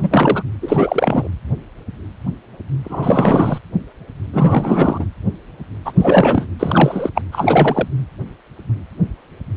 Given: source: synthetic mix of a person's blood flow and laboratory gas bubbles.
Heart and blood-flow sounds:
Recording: Doppler ultrasound of blood flow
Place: precordium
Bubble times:
0.00-0.42 s: bubbles
0.61-1.28 s: bubbles
2.84-3.58 s: bubbles
4.33-5.05 s: bubbles
5.85-5.92 s: bubbles
5.96-6.46 s: bubbles
6.59-7.10 s: bubbles
7.15-7.21 s: bubbles
7.32-7.88 s: bubbles
From the record:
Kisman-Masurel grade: 333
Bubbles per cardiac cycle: rolling drumbeat, 9 or more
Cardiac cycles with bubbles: 50 to 99%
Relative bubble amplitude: loud (0.450 to 0.775)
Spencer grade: 3 (all of the cardiac periods contain showers or single bubble signals, but not dominating or overriding the cardiac motion signals)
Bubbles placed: anywhere in the cardiac cycle

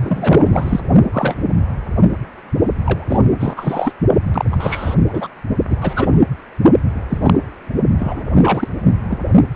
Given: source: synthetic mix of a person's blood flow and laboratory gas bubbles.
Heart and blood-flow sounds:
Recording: Doppler ultrasound of blood flow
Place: precordium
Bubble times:
0.01-0.81 s: bubbles
1.12-1.35 s: bubbles
2.83-3.22 s: bubbles
3.33-3.92 s: bubbles
4.25-4.96 s: bubbles
5.08-5.28 s: bubbles
5.70-5.76 s: bubbles
5.80-6.18 s: bubbles
7.08-7.18 s: bubbles
7.21-7.38 s: bubbles
7.98-8.21 s: bubbles
8.34-8.68 s: bubbles
9.07-9.18 s: bubbles
9.54-9.56 s: bubbles
From the record:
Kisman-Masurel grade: 243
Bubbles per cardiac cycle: several, 3 to 8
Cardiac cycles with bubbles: 100%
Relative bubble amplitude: loud (0.450 to 0.775)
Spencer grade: 3 (all of the cardiac periods contain showers or single bubble signals, but not dominating or overriding the cardiac motion signals)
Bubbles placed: only in the low amplitude regions of the cardiac cycle

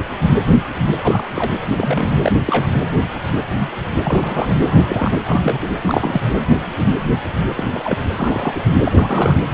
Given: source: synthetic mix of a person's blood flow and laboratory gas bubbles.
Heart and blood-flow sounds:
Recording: Doppler ultrasound of blood flow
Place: precordium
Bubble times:
1.03-1.28 s: bubbles
1.35-1.50 s: bubbles
1.78-2.32 s: bubbles
2.45-2.68 s: bubbles
4.04-4.55 s: bubbles
4.65-5.19 s: bubbles
5.25-5.71 s: bubbles
5.81-6.21 s: bubbles
7.56-7.64 s: bubbles
7.74-7.98 s: bubbles
8.16-8.60 s: bubbles
8.84-8.92 s: bubbles
8.94-9.40 s: bubbles
From the record:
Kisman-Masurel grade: 232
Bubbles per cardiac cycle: several, 3 to 8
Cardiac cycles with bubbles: 50 to 99%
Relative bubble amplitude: moderate (0.250 to 0.450)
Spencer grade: 3 (all of the cardiac periods contain showers or single bubble signals, but not dominating or overriding the cardiac motion signals)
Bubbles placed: anywhere in the cardiac cycle

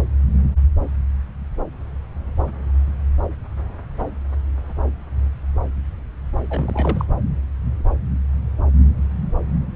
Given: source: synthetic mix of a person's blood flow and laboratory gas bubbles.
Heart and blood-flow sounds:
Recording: Doppler ultrasound of blood flow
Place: subclavian vein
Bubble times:
6.50-7.05 s: bubbles
From the record:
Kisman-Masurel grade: 211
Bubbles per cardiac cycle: several, 3 to 8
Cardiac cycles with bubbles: 1 to 10%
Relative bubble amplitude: barely perceptible (0.100 to 0.250)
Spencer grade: 1 (occasional bubble signal discernible with the cardiac motion signal, with majority of cardiac periods free of bubbles)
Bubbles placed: anywhere in the cardiac cycle

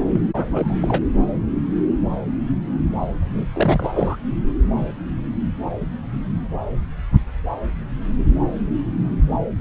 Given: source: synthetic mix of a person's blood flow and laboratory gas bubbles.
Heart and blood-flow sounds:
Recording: Doppler ultrasound of blood flow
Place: subclavian vein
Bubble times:
0.08-0.20 s: bubbles
0.35-1.02 s: bubbles
3.09-3.50 s: bubbles
3.53-4.16 s: bubbles
From the record:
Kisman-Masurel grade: 222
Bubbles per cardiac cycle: several, 3 to 8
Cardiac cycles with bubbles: 10 to 50%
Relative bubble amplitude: moderate (0.250 to 0.450)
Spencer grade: 2 (many but less than half of the cardiac periods contain bubble signals, singularly or in groups)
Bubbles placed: anywhere in the cardiac cycle

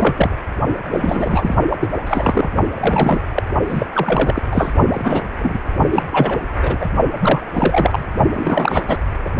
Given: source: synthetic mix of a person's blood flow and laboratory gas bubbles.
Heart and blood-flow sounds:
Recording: Doppler ultrasound of blood flow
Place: precordium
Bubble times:
0.00-0.36 s: bubbles
0.91-1.55 s: bubbles
1.69-1.77 s: bubbles
1.80-1.91 s: bubbles
2.06-2.48 s: bubbles
2.75-3.21 s: bubbles
3.35-3.42 s: bubbles
3.67-3.86 s: bubbles
3.92-4.42 s: bubbles
4.51-4.74 s: bubbles
4.88-5.22 s: bubbles
5.38-5.58 s: bubbles
5.91-6.03 s: bubbles
6.11-6.40 s: bubbles
6.62-6.77 s: bubbles
6.80-6.88 s: bubbles
7.21-7.47 s: bubbles
7.54-8.04 s: bubbles
8.34-8.82 s: bubbles
8.88-8.96 s: bubbles
9.24-9.29 s: bubbles
From the record:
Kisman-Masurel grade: 343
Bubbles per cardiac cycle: rolling drumbeat, 9 or more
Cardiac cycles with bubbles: 100%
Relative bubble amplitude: loud (0.450 to 0.775)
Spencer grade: 3 (all of the cardiac periods contain showers or single bubble signals, but not dominating or overriding the cardiac motion signals)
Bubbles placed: only in the low amplitude regions of the cardiac cycle

